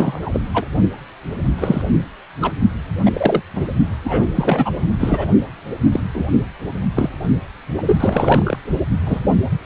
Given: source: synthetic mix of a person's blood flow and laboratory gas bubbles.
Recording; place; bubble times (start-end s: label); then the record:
Doppler ultrasound of blood flow; precordium
0.00-0.40 s: bubbles
0.54-0.65 s: bubbles
1.58-1.82 s: bubbles
2.41-2.52 s: bubbles
3.06-3.42 s: bubbles
3.54-3.68 s: bubbles
4.04-4.28 s: bubbles
4.35-4.70 s: bubbles
5.00-5.26 s: bubbles
5.92-6.00 s: bubbles
6.14-6.24 s: bubbles
6.96-7.09 s: bubbles
7.77-7.83 s: bubbles
7.86-8.59 s: bubbles
9.05-9.19 s: bubbles
From the record:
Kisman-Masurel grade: 243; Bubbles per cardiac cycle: several, 3 to 8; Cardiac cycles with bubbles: 100%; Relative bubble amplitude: loud (0.450 to 0.775); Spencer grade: 3 (all of the cardiac periods contain showers or single bubble signals, but not dominating or overriding the cardiac motion signals); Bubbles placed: only in the low amplitude regions of the cardiac cycle